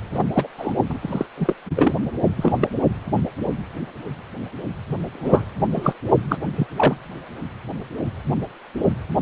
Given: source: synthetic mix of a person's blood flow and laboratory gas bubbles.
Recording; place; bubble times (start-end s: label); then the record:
Doppler ultrasound of blood flow; precordium
0.14-0.23 s: bubbles
0.32-0.47 s: bubbles
0.57-0.75 s: bubbles
0.89-0.99 s: bubbles
1.01-1.26 s: bubbles
1.38-1.54 s: bubbles
1.76-1.95 s: bubbles
2.37-2.52 s: bubbles
2.61-2.68 s: bubbles
5.13-5.46 s: bubbles
5.74-5.96 s: bubbles
6.28-6.38 s: bubbles
6.57-6.67 s: bubbles
6.76-6.97 s: bubbles
From the record:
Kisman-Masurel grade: 233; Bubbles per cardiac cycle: several, 3 to 8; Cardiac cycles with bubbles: 50 to 99%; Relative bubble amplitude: loud (0.450 to 0.775); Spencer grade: 3 (all of the cardiac periods contain showers or single bubble signals, but not dominating or overriding the cardiac motion signals); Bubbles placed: only in the low amplitude regions of the cardiac cycle